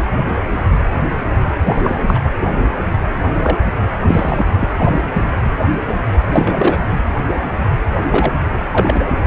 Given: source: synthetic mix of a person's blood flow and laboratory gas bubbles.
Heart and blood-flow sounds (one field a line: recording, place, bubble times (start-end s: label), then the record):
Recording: Doppler ultrasound of blood flow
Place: precordium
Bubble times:
1.65-2.03 s: bubbles
2.07-2.19 s: bubbles
3.43-3.57 s: bubbles
4.08-4.45 s: bubbles
4.59-4.68 s: bubbles
4.78-4.99 s: bubbles
5.13-5.21 s: bubbles
5.45-5.54 s: bubbles
6.32-6.78 s: bubbles
8.11-8.32 s: bubbles
8.73-9.04 s: bubbles
From the record:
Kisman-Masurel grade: 222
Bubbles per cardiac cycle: several, 3 to 8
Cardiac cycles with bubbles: 10 to 50%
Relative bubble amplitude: moderate (0.250 to 0.450)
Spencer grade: 2 (many but less than half of the cardiac periods contain bubble signals, singularly or in groups)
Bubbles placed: anywhere in the cardiac cycle